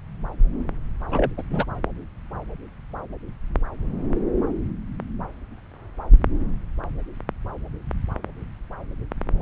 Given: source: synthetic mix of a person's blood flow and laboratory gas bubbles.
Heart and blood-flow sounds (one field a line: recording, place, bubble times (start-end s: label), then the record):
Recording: Doppler ultrasound of blood flow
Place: subclavian vein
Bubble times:
1.09-1.31 s: bubbles
1.38-1.42 s: bubbles
1.50-1.65 s: bubbles
From the record:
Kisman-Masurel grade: 212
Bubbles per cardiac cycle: several, 3 to 8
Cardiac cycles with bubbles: 1 to 10%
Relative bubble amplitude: moderate (0.250 to 0.450)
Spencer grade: 1 (occasional bubble signal discernible with the cardiac motion signal, with majority of cardiac periods free of bubbles)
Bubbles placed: anywhere in the cardiac cycle